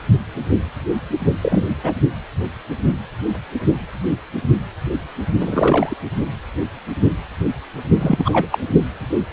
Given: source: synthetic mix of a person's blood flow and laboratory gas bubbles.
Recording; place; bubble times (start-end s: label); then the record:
Doppler ultrasound of blood flow; precordium
1.41-1.64 s: bubbles
1.83-1.93 s: bubbles
5.39-5.95 s: bubbles
7.98-8.47 s: bubbles
8.52-8.59 s: bubbles
From the record:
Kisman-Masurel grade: 223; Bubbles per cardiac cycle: several, 3 to 8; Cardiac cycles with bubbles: 10 to 50%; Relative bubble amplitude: loud (0.450 to 0.775); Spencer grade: 2 (many but less than half of the cardiac periods contain bubble signals, singularly or in groups); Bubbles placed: only in the low amplitude regions of the cardiac cycle